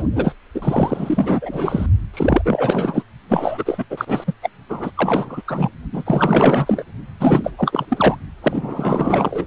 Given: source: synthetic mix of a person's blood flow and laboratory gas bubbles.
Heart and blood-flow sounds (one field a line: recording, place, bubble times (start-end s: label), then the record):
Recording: Doppler ultrasound of blood flow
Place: precordium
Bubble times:
0.00-0.03 s: bubbles
0.15-0.34 s: bubbles
0.54-1.86 s: bubbles
2.13-2.42 s: bubbles
2.45-3.03 s: bubbles
3.28-3.85 s: bubbles
3.90-4.24 s: bubbles
4.27-4.33 s: bubbles
4.42-4.50 s: bubbles
4.69-4.91 s: bubbles
4.96-5.43 s: bubbles
5.47-5.69 s: bubbles
5.92-6.84 s: bubbles
7.20-7.52 s: bubbles
7.57-7.86 s: bubbles
7.89-8.17 s: bubbles
8.42-9.47 s: bubbles
From the record:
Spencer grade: 4 (maximum detectable bubble signal sounding continuously throughout systole and diastole of every cardiac period, and overriding the amplitude of the normal cardiac signals)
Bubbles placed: only in the low amplitude regions of the cardiac cycle